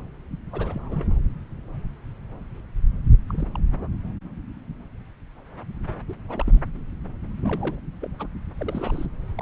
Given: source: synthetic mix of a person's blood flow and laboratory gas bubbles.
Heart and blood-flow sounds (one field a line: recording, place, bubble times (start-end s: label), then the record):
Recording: Doppler ultrasound of blood flow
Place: subclavian vein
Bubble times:
0.53-1.08 s: bubbles
3.29-3.51 s: bubbles
3.55-3.60 s: bubbles
3.71-3.88 s: bubbles
6.08-6.14 s: bubbles
6.28-6.59 s: bubbles
7.44-7.77 s: bubbles
8.01-8.07 s: bubbles
8.18-8.27 s: bubbles
8.59-9.05 s: bubbles
9.38-9.42 s: bubbles
From the record:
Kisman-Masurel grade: 221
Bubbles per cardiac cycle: several, 3 to 8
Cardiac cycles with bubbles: 10 to 50%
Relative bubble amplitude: barely perceptible (0.100 to 0.250)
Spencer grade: 2 (many but less than half of the cardiac periods contain bubble signals, singularly or in groups)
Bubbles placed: anywhere in the cardiac cycle